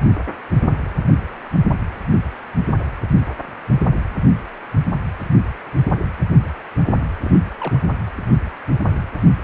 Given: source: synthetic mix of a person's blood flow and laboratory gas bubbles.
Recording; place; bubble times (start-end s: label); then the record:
Doppler ultrasound of blood flow; precordium
7.24-7.40 s: bubbles
7.59-7.77 s: bubbles
From the record:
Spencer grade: 1 (occasional bubble signal discernible with the cardiac motion signal, with majority of cardiac periods free of bubbles); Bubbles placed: anywhere in the cardiac cycle